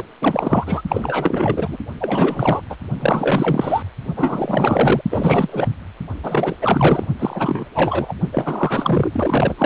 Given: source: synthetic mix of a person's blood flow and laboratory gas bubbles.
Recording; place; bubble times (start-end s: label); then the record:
Doppler ultrasound of blood flow; precordium
0.00-0.04 s: bubbles
0.20-0.81 s: bubbles
0.88-1.77 s: bubbles
2.00-2.61 s: bubbles
2.69-2.76 s: bubbles
2.98-3.82 s: bubbles
4.16-5.01 s: bubbles
5.10-5.68 s: bubbles
6.23-6.55 s: bubbles
6.62-7.06 s: bubbles
7.20-7.66 s: bubbles
7.75-8.13 s: bubbles
8.33-9.54 s: bubbles
9.58-9.65 s: bubbles
From the record:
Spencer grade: 4 (maximum detectable bubble signal sounding continuously throughout systole and diastole of every cardiac period, and overriding the amplitude of the normal cardiac signals); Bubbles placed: only in the low amplitude regions of the cardiac cycle